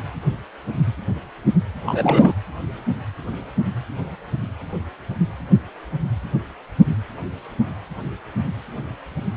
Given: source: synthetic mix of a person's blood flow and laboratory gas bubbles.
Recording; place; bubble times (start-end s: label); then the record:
Doppler ultrasound of blood flow; precordium
1.86-2.33 s: bubbles
From the record:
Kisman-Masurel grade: 222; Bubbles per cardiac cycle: several, 3 to 8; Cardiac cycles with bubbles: 10 to 50%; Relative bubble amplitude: moderate (0.250 to 0.450); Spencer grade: 2 (many but less than half of the cardiac periods contain bubble signals, singularly or in groups); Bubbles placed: anywhere in the cardiac cycle